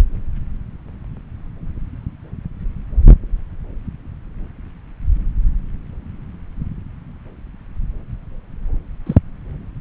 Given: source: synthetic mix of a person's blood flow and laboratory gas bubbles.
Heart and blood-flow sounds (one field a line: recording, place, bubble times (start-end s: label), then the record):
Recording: Doppler ultrasound of blood flow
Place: subclavian vein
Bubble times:
9.06-9.15 s: bubbles
From the record:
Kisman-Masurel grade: 112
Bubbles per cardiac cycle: 1 to 2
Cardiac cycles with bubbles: 1 to 10%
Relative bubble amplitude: moderate (0.250 to 0.450)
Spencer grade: 1 (occasional bubble signal discernible with the cardiac motion signal, with majority of cardiac periods free of bubbles)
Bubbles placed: anywhere in the cardiac cycle